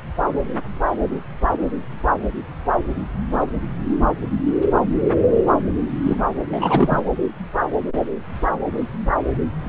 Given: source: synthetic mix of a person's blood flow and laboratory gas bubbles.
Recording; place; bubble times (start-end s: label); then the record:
Doppler ultrasound of blood flow; subclavian vein
6.04-6.20 s: bubbles
6.49-7.02 s: bubbles
From the record:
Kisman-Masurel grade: 222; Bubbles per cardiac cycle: several, 3 to 8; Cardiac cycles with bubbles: 10 to 50%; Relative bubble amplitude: moderate (0.250 to 0.450); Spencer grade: 2 (many but less than half of the cardiac periods contain bubble signals, singularly or in groups); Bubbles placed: anywhere in the cardiac cycle